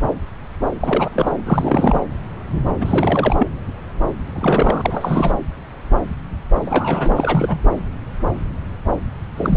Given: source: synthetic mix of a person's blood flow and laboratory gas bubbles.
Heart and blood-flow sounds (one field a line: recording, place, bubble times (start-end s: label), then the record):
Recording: Doppler ultrasound of blood flow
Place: subclavian vein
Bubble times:
0.80-1.42 s: bubbles
1.44-2.00 s: bubbles
2.80-3.35 s: bubbles
3.38-3.48 s: bubbles
4.34-5.31 s: bubbles
6.66-7.61 s: bubbles
9.37-9.57 s: bubbles
From the record:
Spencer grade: 2 (many but less than half of the cardiac periods contain bubble signals, singularly or in groups)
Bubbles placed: anywhere in the cardiac cycle